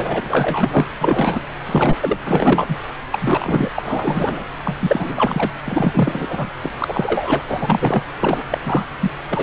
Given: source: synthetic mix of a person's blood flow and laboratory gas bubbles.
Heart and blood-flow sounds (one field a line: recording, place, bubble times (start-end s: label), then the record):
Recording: Doppler ultrasound of blood flow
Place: subclavian vein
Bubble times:
0.00-0.86 s: bubbles
0.98-1.46 s: bubbles
1.65-2.17 s: bubbles
2.25-2.76 s: bubbles
3.11-3.72 s: bubbles
3.75-4.45 s: bubbles
4.64-4.78 s: bubbles
4.80-5.51 s: bubbles
5.65-6.50 s: bubbles
6.62-6.72 s: bubbles
6.79-7.42 s: bubbles
7.48-8.02 s: bubbles
8.20-8.43 s: bubbles
8.50-8.85 s: bubbles
9.02-9.11 s: bubbles
9.29-9.43 s: bubbles
From the record:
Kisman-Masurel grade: 343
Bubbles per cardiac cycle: rolling drumbeat, 9 or more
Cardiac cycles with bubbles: 100%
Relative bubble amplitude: loud (0.450 to 0.775)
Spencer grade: 3 (all of the cardiac periods contain showers or single bubble signals, but not dominating or overriding the cardiac motion signals)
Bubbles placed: anywhere in the cardiac cycle